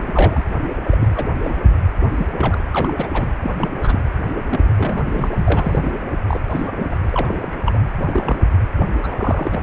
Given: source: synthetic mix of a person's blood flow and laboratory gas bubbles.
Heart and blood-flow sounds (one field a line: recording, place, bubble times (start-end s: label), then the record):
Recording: Doppler ultrasound of blood flow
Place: precordium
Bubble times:
0.00-0.44 s: bubbles
0.91-1.08 s: bubbles
1.15-1.30 s: bubbles
1.44-1.55 s: bubbles
2.17-2.26 s: bubbles
2.33-2.62 s: bubbles
2.71-2.94 s: bubbles
2.97-3.07 s: bubbles
3.13-3.27 s: bubbles
3.43-3.69 s: bubbles
3.82-3.99 s: bubbles
4.46-4.70 s: bubbles
4.78-5.93 s: bubbles
6.27-6.41 s: bubbles
6.50-6.71 s: bubbles
6.78-6.87 s: bubbles
6.91-6.98 s: bubbles
7.06-7.39 s: bubbles
7.42-7.56 s: bubbles
7.65-7.81 s: bubbles
7.98-8.42 s: bubbles
8.80-8.85 s: bubbles
9.03-9.61 s: bubbles
From the record:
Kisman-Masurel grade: 242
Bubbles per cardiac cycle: several, 3 to 8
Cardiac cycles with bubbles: 100%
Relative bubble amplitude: moderate (0.250 to 0.450)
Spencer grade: 3 (all of the cardiac periods contain showers or single bubble signals, but not dominating or overriding the cardiac motion signals)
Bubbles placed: anywhere in the cardiac cycle